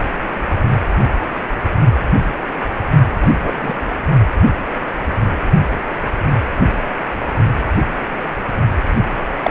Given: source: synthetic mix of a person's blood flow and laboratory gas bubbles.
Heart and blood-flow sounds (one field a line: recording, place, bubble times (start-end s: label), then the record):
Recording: Doppler ultrasound of blood flow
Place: precordium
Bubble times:
3.22-3.32 s: bubbles
3.40-3.75 s: bubbles
9.43-9.51 s: bubbles
From the record:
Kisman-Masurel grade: 123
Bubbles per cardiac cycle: 1 to 2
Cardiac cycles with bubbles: 10 to 50%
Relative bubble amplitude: loud (0.450 to 0.775)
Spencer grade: 2 (many but less than half of the cardiac periods contain bubble signals, singularly or in groups)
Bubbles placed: only in the low amplitude regions of the cardiac cycle